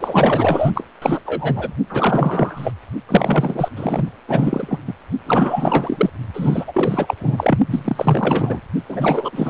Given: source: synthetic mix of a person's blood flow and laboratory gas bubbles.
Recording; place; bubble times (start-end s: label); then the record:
Doppler ultrasound of blood flow; precordium
0.00-0.71 s: bubbles
0.74-0.86 s: bubbles
1.01-1.20 s: bubbles
1.25-1.76 s: bubbles
1.89-2.72 s: bubbles
3.08-3.69 s: bubbles
3.76-4.09 s: bubbles
4.28-4.79 s: bubbles
4.87-4.94 s: bubbles
5.27-6.10 s: bubbles
6.33-7.14 s: bubbles
7.20-7.59 s: bubbles
7.68-8.62 s: bubbles
8.88-9.50 s: bubbles
From the record:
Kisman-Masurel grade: 444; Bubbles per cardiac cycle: continuous sound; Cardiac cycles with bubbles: 100%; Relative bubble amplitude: maximal (0.775 to 0.999); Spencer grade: 4 (maximum detectable bubble signal sounding continuously throughout systole and diastole of every cardiac period, and overriding the amplitude of the normal cardiac signals); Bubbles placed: only in the low amplitude regions of the cardiac cycle